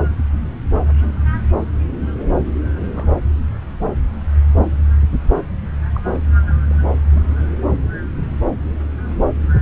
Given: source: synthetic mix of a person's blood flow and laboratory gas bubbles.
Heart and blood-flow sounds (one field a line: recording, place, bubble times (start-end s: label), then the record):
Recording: Doppler ultrasound of blood flow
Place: subclavian vein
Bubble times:
2.94-3.13 s: bubbles
5.94-6.03 s: bubbles
6.15-6.18 s: bubbles
6.40-6.55 s: bubbles
6.70-6.76 s: bubbles
7.15-7.21 s: bubbles
From the record:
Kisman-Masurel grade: 121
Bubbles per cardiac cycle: 1 to 2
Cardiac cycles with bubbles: 10 to 50%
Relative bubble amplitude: barely perceptible (0.100 to 0.250)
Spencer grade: 2 (many but less than half of the cardiac periods contain bubble signals, singularly or in groups)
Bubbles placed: anywhere in the cardiac cycle